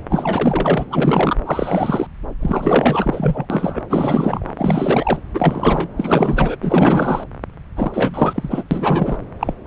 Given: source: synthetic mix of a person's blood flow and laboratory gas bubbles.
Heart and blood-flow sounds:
Doppler ultrasound of blood flow; subclavian vein
0.10-0.86 s: bubbles
0.90-1.36 s: bubbles
1.46-2.07 s: bubbles
2.40-3.46 s: bubbles
3.50-3.81 s: bubbles
3.90-4.53 s: bubbles
4.57-5.19 s: bubbles
5.34-5.90 s: bubbles
5.96-6.56 s: bubbles
6.61-7.24 s: bubbles
7.75-8.63 s: bubbles
8.71-9.20 s: bubbles
9.39-9.54 s: bubbles
9.64-9.67 s: bubbles
From the record:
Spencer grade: 4 (maximum detectable bubble signal sounding continuously throughout systole and diastole of every cardiac period, and overriding the amplitude of the normal cardiac signals); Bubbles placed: anywhere in the cardiac cycle

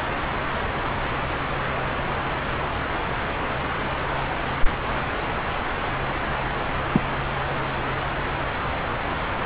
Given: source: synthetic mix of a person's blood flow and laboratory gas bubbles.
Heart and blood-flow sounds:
Doppler ultrasound of blood flow; subclavian vein
6.93-7.04 s: bubbles
From the record:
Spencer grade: 1 (occasional bubble signal discernible with the cardiac motion signal, with majority of cardiac periods free of bubbles); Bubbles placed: anywhere in the cardiac cycle

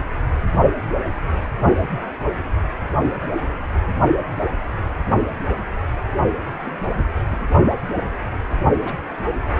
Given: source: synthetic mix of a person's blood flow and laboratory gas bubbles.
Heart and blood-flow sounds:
Doppler ultrasound of blood flow; precordium
5.33-5.40 s: bubbles
6.46-6.71 s: bubbles
7.31-7.38 s: bubbles
8.85-8.96 s: bubbles
9.54-9.60 s: bubbles
From the record:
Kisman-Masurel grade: 121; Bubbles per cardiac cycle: 1 to 2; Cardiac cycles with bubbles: 10 to 50%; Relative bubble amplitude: barely perceptible (0.100 to 0.250); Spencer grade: 2 (many but less than half of the cardiac periods contain bubble signals, singularly or in groups); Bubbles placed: only in the low amplitude regions of the cardiac cycle

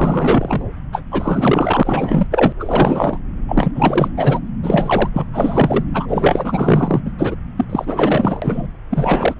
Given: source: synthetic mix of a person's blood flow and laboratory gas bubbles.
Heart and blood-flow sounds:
Doppler ultrasound of blood flow; subclavian vein
0.00-0.65 s: bubbles
0.92-1.03 s: bubbles
1.11-2.27 s: bubbles
2.31-2.53 s: bubbles
2.59-3.19 s: bubbles
3.48-3.72 s: bubbles
3.75-4.08 s: bubbles
4.16-4.40 s: bubbles
4.62-5.09 s: bubbles
5.13-5.25 s: bubbles
5.33-5.84 s: bubbles
5.93-7.02 s: bubbles
7.04-7.12 s: bubbles
7.18-7.35 s: bubbles
7.56-7.64 s: bubbles
7.70-8.67 s: bubbles
8.90-9.34 s: bubbles
From the record:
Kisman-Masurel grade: 444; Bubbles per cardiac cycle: continuous sound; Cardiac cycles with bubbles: 100%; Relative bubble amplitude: maximal (0.775 to 0.999); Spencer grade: 4 (maximum detectable bubble signal sounding continuously throughout systole and diastole of every cardiac period, and overriding the amplitude of the normal cardiac signals); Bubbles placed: anywhere in the cardiac cycle

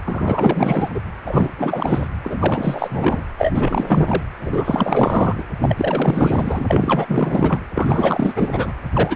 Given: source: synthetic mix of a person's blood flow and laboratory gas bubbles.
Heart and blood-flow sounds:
Doppler ultrasound of blood flow; precordium
0.04-0.89 s: bubbles
0.94-1.00 s: bubbles
1.26-1.52 s: bubbles
1.57-2.08 s: bubbles
2.24-3.22 s: bubbles
3.37-4.33 s: bubbles
4.41-5.43 s: bubbles
5.61-7.59 s: bubbles
7.75-8.73 s: bubbles
8.93-9.16 s: bubbles
From the record:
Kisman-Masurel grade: 444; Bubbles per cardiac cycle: continuous sound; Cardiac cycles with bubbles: 100%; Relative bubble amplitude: maximal (0.775 to 0.999); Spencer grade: 4 (maximum detectable bubble signal sounding continuously throughout systole and diastole of every cardiac period, and overriding the amplitude of the normal cardiac signals); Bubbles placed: anywhere in the cardiac cycle

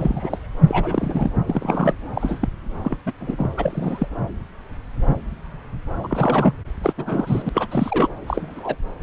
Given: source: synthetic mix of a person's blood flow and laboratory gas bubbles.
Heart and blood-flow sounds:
Doppler ultrasound of blood flow; subclavian vein
0.00-0.41 s: bubbles
0.68-1.31 s: bubbles
1.47-1.93 s: bubbles
2.13-2.49 s: bubbles
2.84-2.97 s: bubbles
3.06-3.12 s: bubbles
3.20-3.50 s: bubbles
3.56-4.08 s: bubbles
6.04-6.08 s: bubbles
6.10-6.54 s: bubbles
6.82-6.93 s: bubbles
6.97-7.50 s: bubbles
7.54-7.67 s: bubbles
7.71-8.09 s: bubbles
8.27-8.75 s: bubbles
From the record:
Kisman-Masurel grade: 232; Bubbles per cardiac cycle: several, 3 to 8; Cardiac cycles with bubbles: 50 to 99%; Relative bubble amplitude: moderate (0.250 to 0.450); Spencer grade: 3 (all of the cardiac periods contain showers or single bubble signals, but not dominating or overriding the cardiac motion signals); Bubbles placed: anywhere in the cardiac cycle

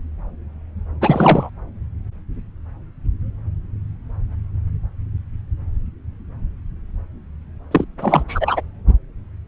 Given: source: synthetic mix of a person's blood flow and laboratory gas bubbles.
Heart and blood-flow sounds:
Doppler ultrasound of blood flow; subclavian vein
1.01-1.50 s: bubbles
7.71-7.85 s: bubbles
7.98-8.23 s: bubbles
8.28-8.61 s: bubbles
From the record:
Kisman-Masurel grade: 213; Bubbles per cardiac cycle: several, 3 to 8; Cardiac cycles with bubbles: 1 to 10%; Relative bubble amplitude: loud (0.450 to 0.775); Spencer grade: 1 (occasional bubble signal discernible with the cardiac motion signal, with majority of cardiac periods free of bubbles); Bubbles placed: anywhere in the cardiac cycle

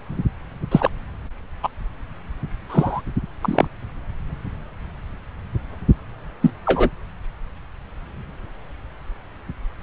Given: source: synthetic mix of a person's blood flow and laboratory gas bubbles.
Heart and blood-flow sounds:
Doppler ultrasound of blood flow; subclavian vein
0.71-0.90 s: bubbles
1.63-1.69 s: bubbles
2.69-3.01 s: bubbles
3.41-3.67 s: bubbles
6.42-6.50 s: bubbles
6.65-6.89 s: bubbles
From the record:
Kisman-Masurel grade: 123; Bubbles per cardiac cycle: 1 to 2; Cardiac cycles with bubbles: 10 to 50%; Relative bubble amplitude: loud (0.450 to 0.775); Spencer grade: 2 (many but less than half of the cardiac periods contain bubble signals, singularly or in groups); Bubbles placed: anywhere in the cardiac cycle

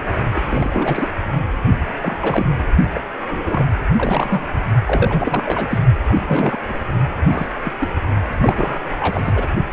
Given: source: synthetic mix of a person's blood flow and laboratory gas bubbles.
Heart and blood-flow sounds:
Doppler ultrasound of blood flow; precordium
0.00-0.02 s: bubbles
0.33-1.08 s: bubbles
2.01-2.46 s: bubbles
2.94-3.02 s: bubbles
3.31-3.67 s: bubbles
3.96-4.46 s: bubbles
4.85-5.42 s: bubbles
5.46-5.79 s: bubbles
6.08-6.59 s: bubbles
6.67-6.79 s: bubbles
7.17-7.72 s: bubbles
7.79-7.89 s: bubbles
8.38-8.81 s: bubbles
8.92-8.96 s: bubbles
8.99-9.46 s: bubbles
From the record:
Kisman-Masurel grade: 342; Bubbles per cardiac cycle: rolling drumbeat, 9 or more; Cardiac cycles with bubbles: 100%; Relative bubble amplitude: moderate (0.250 to 0.450); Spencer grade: 3 (all of the cardiac periods contain showers or single bubble signals, but not dominating or overriding the cardiac motion signals); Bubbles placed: only in the low amplitude regions of the cardiac cycle

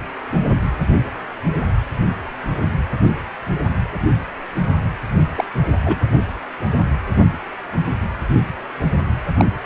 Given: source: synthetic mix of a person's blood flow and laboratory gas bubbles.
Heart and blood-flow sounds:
Doppler ultrasound of blood flow; precordium
5.36-5.45 s: bubbles
5.86-5.96 s: bubbles
9.38-9.46 s: bubbles
From the record:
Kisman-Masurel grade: 122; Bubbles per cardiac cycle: 1 to 2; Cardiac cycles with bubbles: 10 to 50%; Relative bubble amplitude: moderate (0.250 to 0.450); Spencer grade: 2 (many but less than half of the cardiac periods contain bubble signals, singularly or in groups); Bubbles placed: anywhere in the cardiac cycle

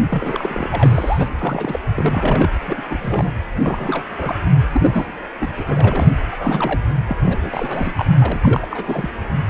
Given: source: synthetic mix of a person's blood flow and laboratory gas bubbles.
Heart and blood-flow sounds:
Doppler ultrasound of blood flow; precordium
0.09-0.68 s: bubbles
0.73-1.28 s: bubbles
1.38-1.79 s: bubbles
1.96-2.50 s: bubbles
2.68-2.83 s: bubbles
2.90-3.33 s: bubbles
3.60-4.03 s: bubbles
4.06-4.36 s: bubbles
4.72-5.12 s: bubbles
5.39-5.53 s: bubbles
5.58-5.63 s: bubbles
5.67-6.16 s: bubbles
6.32-6.80 s: bubbles
7.08-7.16 s: bubbles
7.22-7.38 s: bubbles
7.42-7.94 s: bubbles
7.97-8.05 s: bubbles
8.18-8.67 s: bubbles
8.72-9.10 s: bubbles
From the record:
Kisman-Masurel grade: 342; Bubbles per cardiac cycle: rolling drumbeat, 9 or more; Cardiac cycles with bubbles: 100%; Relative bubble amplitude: moderate (0.250 to 0.450); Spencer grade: 3 (all of the cardiac periods contain showers or single bubble signals, but not dominating or overriding the cardiac motion signals); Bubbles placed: anywhere in the cardiac cycle

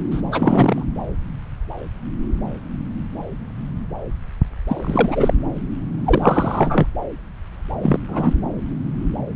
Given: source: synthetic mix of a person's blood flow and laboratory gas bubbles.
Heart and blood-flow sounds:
Doppler ultrasound of blood flow; subclavian vein
0.11-0.21 s: bubbles
0.31-0.83 s: bubbles
4.67-5.33 s: bubbles
6.04-6.86 s: bubbles
7.82-8.00 s: bubbles
8.08-8.34 s: bubbles
From the record:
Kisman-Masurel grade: 223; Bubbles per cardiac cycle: several, 3 to 8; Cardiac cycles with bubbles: 10 to 50%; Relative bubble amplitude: loud (0.450 to 0.775); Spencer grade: 2 (many but less than half of the cardiac periods contain bubble signals, singularly or in groups); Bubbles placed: anywhere in the cardiac cycle

